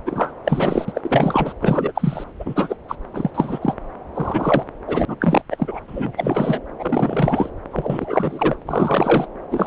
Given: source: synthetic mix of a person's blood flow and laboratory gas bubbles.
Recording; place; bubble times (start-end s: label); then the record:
Doppler ultrasound of blood flow; subclavian vein
0.05-0.34 s: bubbles
0.45-0.85 s: bubbles
0.88-1.54 s: bubbles
1.60-1.92 s: bubbles
1.95-2.24 s: bubbles
2.40-2.75 s: bubbles
2.88-2.95 s: bubbles
3.13-3.30 s: bubbles
3.34-3.74 s: bubbles
4.15-4.64 s: bubbles
4.88-5.05 s: bubbles
5.08-5.16 s: bubbles
5.20-5.42 s: bubbles
5.50-5.79 s: bubbles
5.88-6.61 s: bubbles
6.79-7.50 s: bubbles
7.71-8.55 s: bubbles
8.66-9.26 s: bubbles
9.51-9.67 s: bubbles
From the record:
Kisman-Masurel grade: 343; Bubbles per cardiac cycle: rolling drumbeat, 9 or more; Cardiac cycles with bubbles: 100%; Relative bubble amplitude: loud (0.450 to 0.775); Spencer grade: 3 (all of the cardiac periods contain showers or single bubble signals, but not dominating or overriding the cardiac motion signals); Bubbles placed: anywhere in the cardiac cycle